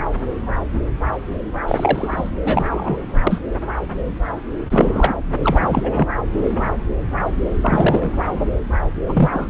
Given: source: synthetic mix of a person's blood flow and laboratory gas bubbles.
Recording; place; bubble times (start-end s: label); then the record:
Doppler ultrasound of blood flow; subclavian vein
1.67-2.31 s: bubbles
2.44-2.98 s: bubbles
3.27-3.41 s: bubbles
4.70-5.15 s: bubbles
5.42-5.62 s: bubbles
5.69-6.08 s: bubbles
7.62-8.11 s: bubbles
9.08-9.29 s: bubbles
9.33-9.50 s: bubbles
From the record:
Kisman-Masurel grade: 223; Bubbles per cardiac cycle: several, 3 to 8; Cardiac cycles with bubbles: 10 to 50%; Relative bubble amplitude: loud (0.450 to 0.775); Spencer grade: 2 (many but less than half of the cardiac periods contain bubble signals, singularly or in groups); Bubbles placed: anywhere in the cardiac cycle